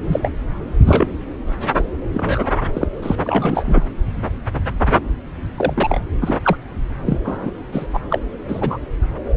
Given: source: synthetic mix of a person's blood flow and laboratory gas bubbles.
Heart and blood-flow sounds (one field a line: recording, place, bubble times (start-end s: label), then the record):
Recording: Doppler ultrasound of blood flow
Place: subclavian vein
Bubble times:
0.04-0.29 s: bubbles
0.85-1.08 s: bubbles
1.78-1.83 s: bubbles
2.12-2.50 s: bubbles
2.73-2.88 s: bubbles
3.02-3.16 s: bubbles
3.24-3.83 s: bubbles
4.87-4.99 s: bubbles
5.57-5.74 s: bubbles
5.76-6.00 s: bubbles
6.21-6.39 s: bubbles
6.42-6.56 s: bubbles
7.06-7.18 s: bubbles
7.24-7.51 s: bubbles
7.72-7.87 s: bubbles
7.93-7.99 s: bubbles
8.09-8.19 s: bubbles
8.48-8.77 s: bubbles
From the record:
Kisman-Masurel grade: 243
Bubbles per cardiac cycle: several, 3 to 8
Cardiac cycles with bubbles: 100%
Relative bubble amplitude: loud (0.450 to 0.775)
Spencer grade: 3 (all of the cardiac periods contain showers or single bubble signals, but not dominating or overriding the cardiac motion signals)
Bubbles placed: anywhere in the cardiac cycle